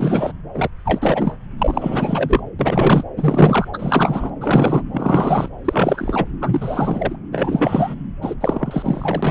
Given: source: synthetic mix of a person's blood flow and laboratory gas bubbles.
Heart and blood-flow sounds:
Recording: Doppler ultrasound of blood flow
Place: subclavian vein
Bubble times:
0.00-0.33 s: bubbles
0.54-0.70 s: bubbles
0.84-1.38 s: bubbles
1.58-2.40 s: bubbles
2.59-3.04 s: bubbles
3.17-3.68 s: bubbles
3.73-4.30 s: bubbles
4.41-4.83 s: bubbles
4.92-5.49 s: bubbles
5.64-6.25 s: bubbles
6.41-7.16 s: bubbles
7.32-7.94 s: bubbles
8.22-8.34 s: bubbles
8.41-9.31 s: bubbles
From the record:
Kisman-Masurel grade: 343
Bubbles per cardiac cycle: rolling drumbeat, 9 or more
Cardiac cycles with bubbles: 100%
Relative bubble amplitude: loud (0.450 to 0.775)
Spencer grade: 3 (all of the cardiac periods contain showers or single bubble signals, but not dominating or overriding the cardiac motion signals)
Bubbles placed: anywhere in the cardiac cycle

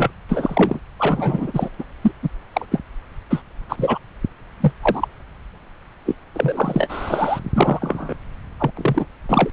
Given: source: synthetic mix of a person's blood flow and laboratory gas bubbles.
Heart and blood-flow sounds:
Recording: Doppler ultrasound of blood flow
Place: subclavian vein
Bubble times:
0.00-0.11 s: bubbles
0.29-0.80 s: bubbles
0.99-1.70 s: bubbles
1.78-1.84 s: bubbles
2.01-2.11 s: bubbles
2.22-2.29 s: bubbles
2.53-2.65 s: bubbles
2.71-2.79 s: bubbles
3.30-3.42 s: bubbles
3.69-3.98 s: bubbles
4.60-4.72 s: bubbles
4.82-5.08 s: bubbles
6.06-6.15 s: bubbles
6.34-7.41 s: bubbles
7.53-8.14 s: bubbles
8.58-8.71 s: bubbles
8.77-9.06 s: bubbles
9.29-9.50 s: bubbles
From the record:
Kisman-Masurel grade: 243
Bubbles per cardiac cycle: several, 3 to 8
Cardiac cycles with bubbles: 100%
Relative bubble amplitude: loud (0.450 to 0.775)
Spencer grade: 3 (all of the cardiac periods contain showers or single bubble signals, but not dominating or overriding the cardiac motion signals)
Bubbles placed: anywhere in the cardiac cycle

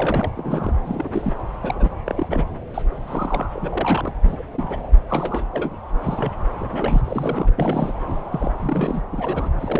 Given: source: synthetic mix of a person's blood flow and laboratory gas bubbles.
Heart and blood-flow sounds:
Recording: Doppler ultrasound of blood flow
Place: subclavian vein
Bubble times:
0.00-0.31 s: bubbles
0.35-0.74 s: bubbles
0.84-1.08 s: bubbles
1.11-1.34 s: bubbles
1.61-1.95 s: bubbles
2.04-2.44 s: bubbles
2.74-2.82 s: bubbles
3.07-3.46 s: bubbles
3.52-4.13 s: bubbles
4.23-4.43 s: bubbles
4.52-4.77 s: bubbles
5.08-5.46 s: bubbles
5.52-5.79 s: bubbles
6.01-6.31 s: bubbles
6.59-7.01 s: bubbles
7.04-7.50 s: bubbles
7.57-7.93 s: bubbles
8.07-8.16 s: bubbles
8.31-8.53 s: bubbles
8.59-9.01 s: bubbles
9.12-9.49 s: bubbles
9.60-9.80 s: bubbles
From the record:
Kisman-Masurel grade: 242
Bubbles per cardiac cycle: several, 3 to 8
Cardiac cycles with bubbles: 100%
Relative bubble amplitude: moderate (0.250 to 0.450)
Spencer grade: 3 (all of the cardiac periods contain showers or single bubble signals, but not dominating or overriding the cardiac motion signals)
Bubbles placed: anywhere in the cardiac cycle

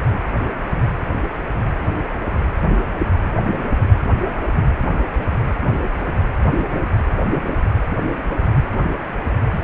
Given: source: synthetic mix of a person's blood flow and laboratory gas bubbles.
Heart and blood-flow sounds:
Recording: Doppler ultrasound of blood flow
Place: precordium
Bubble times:
9.53-9.60 s: bubbles
From the record:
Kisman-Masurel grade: 113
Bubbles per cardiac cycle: 1 to 2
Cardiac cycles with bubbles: 1 to 10%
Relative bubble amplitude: loud (0.450 to 0.775)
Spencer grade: 1 (occasional bubble signal discernible with the cardiac motion signal, with majority of cardiac periods free of bubbles)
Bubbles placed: anywhere in the cardiac cycle

